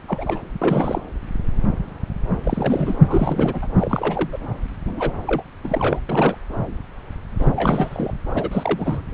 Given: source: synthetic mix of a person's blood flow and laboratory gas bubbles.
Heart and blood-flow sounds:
Doppler ultrasound of blood flow; subclavian vein
0.08-0.42 s: bubbles
0.61-1.04 s: bubbles
2.44-2.97 s: bubbles
3.08-3.67 s: bubbles
3.75-4.38 s: bubbles
4.86-5.12 s: bubbles
5.27-5.43 s: bubbles
5.64-6.00 s: bubbles
6.09-6.36 s: bubbles
7.39-7.49 s: bubbles
7.55-8.12 s: bubbles
8.29-9.04 s: bubbles
From the record:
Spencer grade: 3 (all of the cardiac periods contain showers or single bubble signals, but not dominating or overriding the cardiac motion signals); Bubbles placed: anywhere in the cardiac cycle

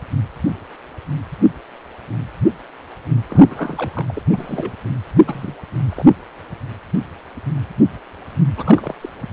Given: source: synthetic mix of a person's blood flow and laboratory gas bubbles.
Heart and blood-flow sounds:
Doppler ultrasound of blood flow; precordium
3.28-4.23 s: bubbles
4.32-4.75 s: bubbles
5.27-5.54 s: bubbles
5.89-6.05 s: bubbles
8.56-8.94 s: bubbles
9.01-9.10 s: bubbles
From the record:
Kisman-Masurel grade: 221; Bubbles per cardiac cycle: several, 3 to 8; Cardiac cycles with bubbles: 10 to 50%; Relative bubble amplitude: barely perceptible (0.100 to 0.250); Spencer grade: 2 (many but less than half of the cardiac periods contain bubble signals, singularly or in groups); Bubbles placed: anywhere in the cardiac cycle

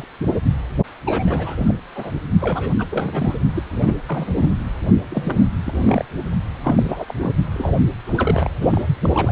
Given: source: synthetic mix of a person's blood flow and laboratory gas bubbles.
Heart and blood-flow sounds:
Doppler ultrasound of blood flow; precordium
0.00-0.04 s: bubbles
1.05-1.74 s: bubbles
1.95-2.12 s: bubbles
2.40-2.73 s: bubbles
2.78-3.37 s: bubbles
3.55-3.63 s: bubbles
3.71-3.95 s: bubbles
4.08-4.55 s: bubbles
5.09-5.49 s: bubbles
5.65-6.05 s: bubbles
6.63-7.04 s: bubbles
7.08-7.14 s: bubbles
7.20-7.33 s: bubbles
7.53-7.76 s: bubbles
8.05-8.51 s: bubbles
8.60-8.85 s: bubbles
9.02-9.09 s: bubbles
9.13-9.32 s: bubbles
From the record:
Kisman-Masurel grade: 342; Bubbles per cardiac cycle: rolling drumbeat, 9 or more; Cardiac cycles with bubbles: 100%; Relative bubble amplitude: moderate (0.250 to 0.450); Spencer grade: 3 (all of the cardiac periods contain showers or single bubble signals, but not dominating or overriding the cardiac motion signals); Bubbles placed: only in the low amplitude regions of the cardiac cycle

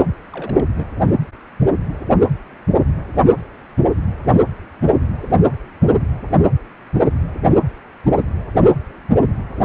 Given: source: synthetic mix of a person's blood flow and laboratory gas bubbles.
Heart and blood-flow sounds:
Doppler ultrasound of blood flow; precordium
0.33-0.65 s: bubbles
0.77-0.85 s: bubbles
From the record:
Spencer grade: 1 (occasional bubble signal discernible with the cardiac motion signal, with majority of cardiac periods free of bubbles); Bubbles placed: anywhere in the cardiac cycle

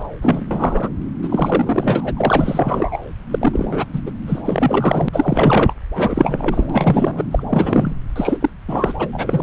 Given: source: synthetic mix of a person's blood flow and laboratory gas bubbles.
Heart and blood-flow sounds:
Doppler ultrasound of blood flow; subclavian vein
0.00-0.03 s: bubbles
0.22-0.44 s: bubbles
0.51-0.89 s: bubbles
1.22-2.14 s: bubbles
2.17-2.98 s: bubbles
3.31-3.85 s: bubbles
3.93-4.01 s: bubbles
4.05-4.11 s: bubbles
4.27-4.42 s: bubbles
4.45-5.09 s: bubbles
5.12-5.73 s: bubbles
5.95-6.67 s: bubbles
6.70-7.24 s: bubbles
7.31-7.43 s: bubbles
7.48-7.93 s: bubbles
8.16-8.38 s: bubbles
8.41-8.50 s: bubbles
8.68-8.94 s: bubbles
8.99-9.08 s: bubbles
9.12-9.43 s: bubbles
From the record:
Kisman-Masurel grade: 343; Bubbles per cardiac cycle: rolling drumbeat, 9 or more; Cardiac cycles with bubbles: 100%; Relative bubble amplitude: loud (0.450 to 0.775); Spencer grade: 3 (all of the cardiac periods contain showers or single bubble signals, but not dominating or overriding the cardiac motion signals); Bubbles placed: anywhere in the cardiac cycle

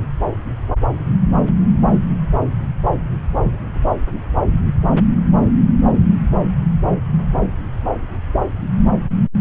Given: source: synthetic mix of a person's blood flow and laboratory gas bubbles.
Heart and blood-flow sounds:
Doppler ultrasound of blood flow; subclavian vein
no bubbles
From the record:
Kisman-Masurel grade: 000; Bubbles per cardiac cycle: 0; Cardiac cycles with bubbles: 0%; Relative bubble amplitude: no bubbles discernible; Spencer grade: 0 (complete lack of bubble signals)

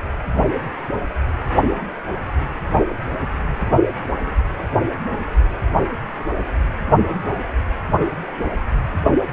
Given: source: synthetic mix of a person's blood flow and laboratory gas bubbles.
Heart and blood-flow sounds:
Doppler ultrasound of blood flow; precordium
3.97-4.13 s: bubbles
From the record:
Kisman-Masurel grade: 112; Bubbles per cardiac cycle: 1 to 2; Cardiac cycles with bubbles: 1 to 10%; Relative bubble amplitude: moderate (0.250 to 0.450); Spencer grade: 1 (occasional bubble signal discernible with the cardiac motion signal, with majority of cardiac periods free of bubbles); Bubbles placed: only in the low amplitude regions of the cardiac cycle

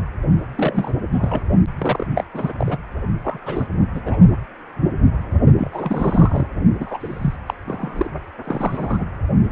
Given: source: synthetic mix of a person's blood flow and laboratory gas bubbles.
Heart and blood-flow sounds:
Doppler ultrasound of blood flow; precordium
0.56-0.93 s: bubbles
1.13-1.43 s: bubbles
1.78-2.06 s: bubbles
2.15-2.24 s: bubbles
2.33-2.52 s: bubbles
2.58-2.78 s: bubbles
3.23-3.38 s: bubbles
3.46-3.67 s: bubbles
3.94-4.02 s: bubbles
4.06-4.17 s: bubbles
5.57-6.48 s: bubbles
6.79-7.36 s: bubbles
7.46-7.54 s: bubbles
7.67-8.11 s: bubbles
8.44-9.04 s: bubbles
From the record:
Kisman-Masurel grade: 232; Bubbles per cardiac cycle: several, 3 to 8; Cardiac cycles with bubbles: 50 to 99%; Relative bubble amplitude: moderate (0.250 to 0.450); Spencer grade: 3 (all of the cardiac periods contain showers or single bubble signals, but not dominating or overriding the cardiac motion signals); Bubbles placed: only in the low amplitude regions of the cardiac cycle

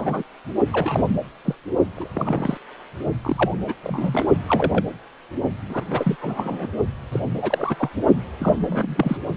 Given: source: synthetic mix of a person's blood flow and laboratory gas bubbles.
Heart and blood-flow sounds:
Doppler ultrasound of blood flow; precordium
0.00-0.23 s: bubbles
0.72-1.04 s: bubbles
1.44-1.55 s: bubbles
1.96-2.08 s: bubbles
2.13-2.57 s: bubbles
3.21-3.55 s: bubbles
3.58-3.74 s: bubbles
3.83-4.26 s: bubbles
4.49-4.84 s: bubbles
5.68-5.84 s: bubbles
5.90-6.16 s: bubbles
6.21-6.67 s: bubbles
7.12-7.20 s: bubbles
7.38-7.76 s: bubbles
7.78-7.90 s: bubbles
8.38-8.53 s: bubbles
8.62-9.17 s: bubbles
From the record:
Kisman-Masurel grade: 242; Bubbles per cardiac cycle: several, 3 to 8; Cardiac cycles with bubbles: 100%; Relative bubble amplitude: moderate (0.250 to 0.450); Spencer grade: 3 (all of the cardiac periods contain showers or single bubble signals, but not dominating or overriding the cardiac motion signals); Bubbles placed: only in the low amplitude regions of the cardiac cycle

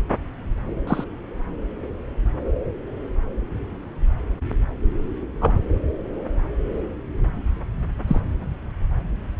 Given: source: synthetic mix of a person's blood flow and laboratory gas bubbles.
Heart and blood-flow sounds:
Doppler ultrasound of blood flow; subclavian vein
0.87-1.04 s: bubbles
5.41-5.57 s: bubbles
8.07-8.20 s: bubbles
From the record:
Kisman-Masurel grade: 122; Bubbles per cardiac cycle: 1 to 2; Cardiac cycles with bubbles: 10 to 50%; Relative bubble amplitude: moderate (0.250 to 0.450); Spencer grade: 2 (many but less than half of the cardiac periods contain bubble signals, singularly or in groups); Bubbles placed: anywhere in the cardiac cycle

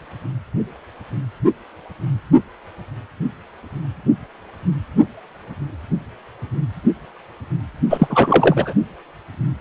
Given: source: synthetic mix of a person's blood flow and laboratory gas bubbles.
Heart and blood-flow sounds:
Doppler ultrasound of blood flow; precordium
7.90-8.73 s: bubbles
From the record:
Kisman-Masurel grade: 213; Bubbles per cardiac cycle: several, 3 to 8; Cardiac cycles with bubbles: 1 to 10%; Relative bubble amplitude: loud (0.450 to 0.775); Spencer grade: 1 (occasional bubble signal discernible with the cardiac motion signal, with majority of cardiac periods free of bubbles); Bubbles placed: only in the low amplitude regions of the cardiac cycle

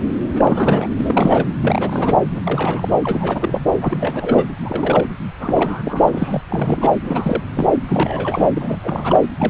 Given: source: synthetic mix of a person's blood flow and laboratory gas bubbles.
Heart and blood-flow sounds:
Doppler ultrasound of blood flow; subclavian vein
0.33-0.89 s: bubbles
0.97-1.50 s: bubbles
1.61-2.23 s: bubbles
2.35-2.42 s: bubbles
2.45-2.90 s: bubbles
3.04-3.61 s: bubbles
3.81-4.45 s: bubbles
4.62-5.09 s: bubbles
5.39-6.42 s: bubbles
6.49-6.92 s: bubbles
7.04-7.44 s: bubbles
7.54-7.70 s: bubbles
7.88-8.49 s: bubbles
8.56-8.77 s: bubbles
8.83-9.21 s: bubbles
9.38-9.50 s: bubbles
From the record:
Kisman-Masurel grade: 342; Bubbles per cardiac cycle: rolling drumbeat, 9 or more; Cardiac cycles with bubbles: 100%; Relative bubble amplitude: moderate (0.250 to 0.450); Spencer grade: 3 (all of the cardiac periods contain showers or single bubble signals, but not dominating or overriding the cardiac motion signals); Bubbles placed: anywhere in the cardiac cycle

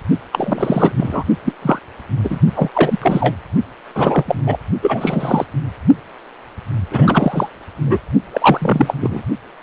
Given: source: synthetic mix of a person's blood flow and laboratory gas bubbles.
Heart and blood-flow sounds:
Doppler ultrasound of blood flow; precordium
0.32-0.92 s: bubbles
0.97-1.24 s: bubbles
1.44-1.52 s: bubbles
1.62-1.79 s: bubbles
2.24-2.38 s: bubbles
2.54-2.70 s: bubbles
2.74-3.35 s: bubbles
3.94-4.40 s: bubbles
4.46-4.58 s: bubbles
4.82-5.45 s: bubbles
6.90-7.48 s: bubbles
7.83-7.98 s: bubbles
8.33-8.94 s: bubbles
9.00-9.23 s: bubbles
From the record:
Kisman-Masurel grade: 243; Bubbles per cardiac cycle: several, 3 to 8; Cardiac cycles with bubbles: 100%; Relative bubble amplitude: loud (0.450 to 0.775); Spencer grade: 3 (all of the cardiac periods contain showers or single bubble signals, but not dominating or overriding the cardiac motion signals); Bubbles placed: only in the low amplitude regions of the cardiac cycle

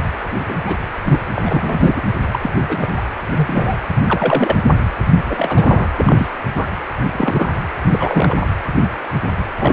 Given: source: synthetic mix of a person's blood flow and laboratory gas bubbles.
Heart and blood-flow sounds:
Doppler ultrasound of blood flow; precordium
0.48-0.55 s: bubbles
0.65-0.77 s: bubbles
1.04-1.21 s: bubbles
1.35-2.01 s: bubbles
2.33-2.39 s: bubbles
2.42-2.51 s: bubbles
2.67-2.88 s: bubbles
2.96-3.03 s: bubbles
3.36-3.77 s: bubbles
4.06-4.56 s: bubbles
5.25-5.91 s: bubbles
5.97-6.27 s: bubbles
6.56-6.67 s: bubbles
7.13-7.52 s: bubbles
7.92-8.47 s: bubbles
9.59-9.73 s: bubbles
From the record:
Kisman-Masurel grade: 232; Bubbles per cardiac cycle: several, 3 to 8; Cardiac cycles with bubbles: 50 to 99%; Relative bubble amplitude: moderate (0.250 to 0.450); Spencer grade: 3 (all of the cardiac periods contain showers or single bubble signals, but not dominating or overriding the cardiac motion signals); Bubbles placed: anywhere in the cardiac cycle

